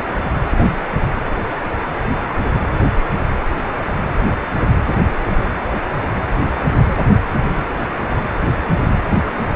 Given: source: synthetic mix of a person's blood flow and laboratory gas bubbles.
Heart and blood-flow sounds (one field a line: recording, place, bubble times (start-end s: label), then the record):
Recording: Doppler ultrasound of blood flow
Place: precordium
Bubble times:
no bubbles
From the record:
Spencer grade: 0 (complete lack of bubble signals)